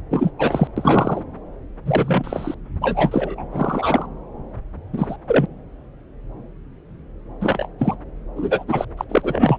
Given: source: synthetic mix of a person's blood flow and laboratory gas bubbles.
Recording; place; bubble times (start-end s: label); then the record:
Doppler ultrasound of blood flow; subclavian vein
0.10-0.32 s: bubbles
0.38-0.68 s: bubbles
0.76-1.22 s: bubbles
1.85-2.55 s: bubbles
2.81-3.46 s: bubbles
3.52-4.06 s: bubbles
4.92-5.16 s: bubbles
5.27-5.46 s: bubbles
7.40-7.68 s: bubbles
7.79-7.96 s: bubbles
8.36-8.63 s: bubbles
8.67-8.85 s: bubbles
8.97-9.04 s: bubbles
9.09-9.57 s: bubbles
From the record:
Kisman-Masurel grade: 232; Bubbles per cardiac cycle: several, 3 to 8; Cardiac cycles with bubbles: 50 to 99%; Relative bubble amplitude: moderate (0.250 to 0.450); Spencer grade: 3 (all of the cardiac periods contain showers or single bubble signals, but not dominating or overriding the cardiac motion signals); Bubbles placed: anywhere in the cardiac cycle